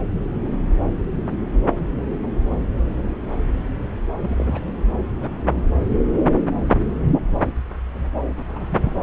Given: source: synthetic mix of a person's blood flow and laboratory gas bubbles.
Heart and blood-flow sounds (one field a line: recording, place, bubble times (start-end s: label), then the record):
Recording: Doppler ultrasound of blood flow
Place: subclavian vein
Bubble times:
4.22-4.72 s: bubbles
5.22-5.28 s: bubbles
5.79-5.92 s: bubbles
5.99-6.04 s: bubbles
6.13-6.20 s: bubbles
8.37-8.43 s: bubbles
8.48-8.93 s: bubbles
From the record:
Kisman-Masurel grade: 221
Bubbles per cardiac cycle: several, 3 to 8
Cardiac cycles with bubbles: 10 to 50%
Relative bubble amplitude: barely perceptible (0.100 to 0.250)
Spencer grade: 2 (many but less than half of the cardiac periods contain bubble signals, singularly or in groups)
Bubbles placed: anywhere in the cardiac cycle